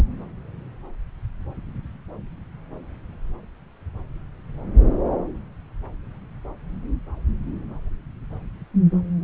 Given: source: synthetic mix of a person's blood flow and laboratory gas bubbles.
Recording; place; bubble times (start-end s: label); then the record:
Doppler ultrasound of blood flow; subclavian vein
0.00-0.04 s: bubbles
From the record:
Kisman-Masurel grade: 212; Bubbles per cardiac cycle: several, 3 to 8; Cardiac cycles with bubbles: 1 to 10%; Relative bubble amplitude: moderate (0.250 to 0.450); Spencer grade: 1 (occasional bubble signal discernible with the cardiac motion signal, with majority of cardiac periods free of bubbles); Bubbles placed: anywhere in the cardiac cycle